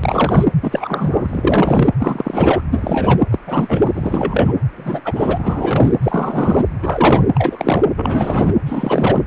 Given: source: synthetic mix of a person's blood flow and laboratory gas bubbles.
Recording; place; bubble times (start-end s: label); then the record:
Doppler ultrasound of blood flow; precordium
0.03-0.45 s: bubbles
0.61-1.88 s: bubbles
1.98-2.62 s: bubbles
2.71-3.25 s: bubbles
3.30-3.39 s: bubbles
3.46-3.91 s: bubbles
3.94-4.53 s: bubbles
4.76-5.00 s: bubbles
5.04-5.95 s: bubbles
6.03-6.65 s: bubbles
6.82-7.25 s: bubbles
7.34-7.84 s: bubbles
7.96-8.54 s: bubbles
8.65-9.23 s: bubbles
From the record:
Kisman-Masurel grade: 343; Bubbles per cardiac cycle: rolling drumbeat, 9 or more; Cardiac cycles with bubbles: 100%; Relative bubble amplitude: loud (0.450 to 0.775); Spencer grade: 3 (all of the cardiac periods contain showers or single bubble signals, but not dominating or overriding the cardiac motion signals); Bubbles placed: anywhere in the cardiac cycle